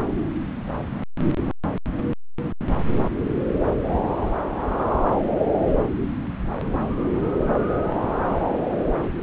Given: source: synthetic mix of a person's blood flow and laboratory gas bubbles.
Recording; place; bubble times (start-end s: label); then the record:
Doppler ultrasound of blood flow; subclavian vein
no bubbles
From the record:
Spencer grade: 0 (complete lack of bubble signals)